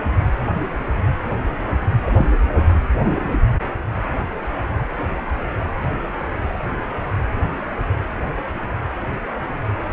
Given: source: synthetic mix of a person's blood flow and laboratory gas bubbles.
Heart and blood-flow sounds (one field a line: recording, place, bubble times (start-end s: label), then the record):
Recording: Doppler ultrasound of blood flow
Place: precordium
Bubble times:
2.07-2.12 s: bubbles
2.18-2.34 s: bubbles
From the record:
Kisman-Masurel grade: 122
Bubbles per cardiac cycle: 1 to 2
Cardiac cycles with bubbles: 10 to 50%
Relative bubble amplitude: moderate (0.250 to 0.450)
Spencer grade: 2 (many but less than half of the cardiac periods contain bubble signals, singularly or in groups)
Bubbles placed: anywhere in the cardiac cycle